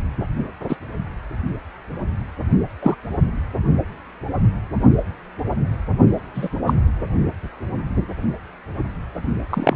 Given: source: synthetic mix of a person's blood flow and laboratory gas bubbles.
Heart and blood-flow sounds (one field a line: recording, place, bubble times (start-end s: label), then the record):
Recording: Doppler ultrasound of blood flow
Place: precordium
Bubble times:
0.69-0.76 s: bubbles
2.83-2.95 s: bubbles
6.34-6.49 s: bubbles
6.67-6.74 s: bubbles
9.50-9.76 s: bubbles
From the record:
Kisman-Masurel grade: 123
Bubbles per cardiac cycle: 1 to 2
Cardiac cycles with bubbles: 10 to 50%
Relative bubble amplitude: loud (0.450 to 0.775)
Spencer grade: 2 (many but less than half of the cardiac periods contain bubble signals, singularly or in groups)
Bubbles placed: only in the low amplitude regions of the cardiac cycle